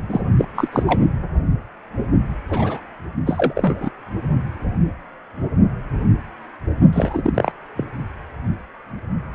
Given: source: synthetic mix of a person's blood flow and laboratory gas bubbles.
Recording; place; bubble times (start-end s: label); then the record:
Doppler ultrasound of blood flow; precordium
0.09-0.24 s: bubbles
0.37-0.45 s: bubbles
0.55-0.68 s: bubbles
0.72-0.83 s: bubbles
0.87-0.99 s: bubbles
2.50-2.80 s: bubbles
3.26-3.90 s: bubbles
6.92-7.52 s: bubbles
7.76-7.84 s: bubbles
From the record:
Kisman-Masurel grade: 223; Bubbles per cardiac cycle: several, 3 to 8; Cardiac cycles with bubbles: 10 to 50%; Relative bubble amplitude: loud (0.450 to 0.775); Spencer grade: 2 (many but less than half of the cardiac periods contain bubble signals, singularly or in groups); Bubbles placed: only in the low amplitude regions of the cardiac cycle